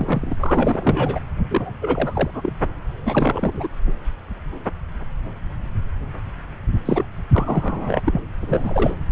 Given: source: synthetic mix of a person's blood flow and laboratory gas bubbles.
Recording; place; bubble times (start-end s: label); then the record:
Doppler ultrasound of blood flow; subclavian vein
0.00-0.35 s: bubbles
0.40-1.19 s: bubbles
1.50-1.74 s: bubbles
1.81-2.30 s: bubbles
2.33-2.53 s: bubbles
3.04-3.68 s: bubbles
3.86-3.92 s: bubbles
6.85-7.05 s: bubbles
7.33-8.01 s: bubbles
8.05-8.20 s: bubbles
8.40-8.95 s: bubbles
From the record:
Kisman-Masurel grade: 332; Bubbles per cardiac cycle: rolling drumbeat, 9 or more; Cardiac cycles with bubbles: 50 to 99%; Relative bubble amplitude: moderate (0.250 to 0.450); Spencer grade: 3 (all of the cardiac periods contain showers or single bubble signals, but not dominating or overriding the cardiac motion signals); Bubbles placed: anywhere in the cardiac cycle